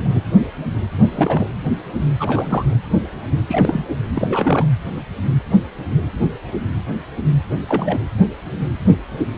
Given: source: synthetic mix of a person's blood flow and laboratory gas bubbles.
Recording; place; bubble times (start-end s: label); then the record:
Doppler ultrasound of blood flow; precordium
0.00-0.22 s: bubbles
1.11-1.50 s: bubbles
2.19-2.77 s: bubbles
3.48-3.84 s: bubbles
4.15-4.68 s: bubbles
7.68-7.98 s: bubbles
From the record:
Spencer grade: 2 (many but less than half of the cardiac periods contain bubble signals, singularly or in groups); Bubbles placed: anywhere in the cardiac cycle